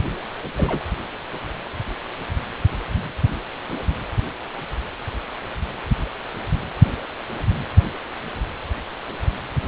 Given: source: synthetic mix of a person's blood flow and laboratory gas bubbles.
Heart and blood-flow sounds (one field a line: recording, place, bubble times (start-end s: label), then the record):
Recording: Doppler ultrasound of blood flow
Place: precordium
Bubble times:
0.57-0.83 s: bubbles
From the record:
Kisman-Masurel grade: 111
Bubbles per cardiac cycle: 1 to 2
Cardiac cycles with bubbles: 1 to 10%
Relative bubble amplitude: barely perceptible (0.100 to 0.250)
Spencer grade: 1 (occasional bubble signal discernible with the cardiac motion signal, with majority of cardiac periods free of bubbles)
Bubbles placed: anywhere in the cardiac cycle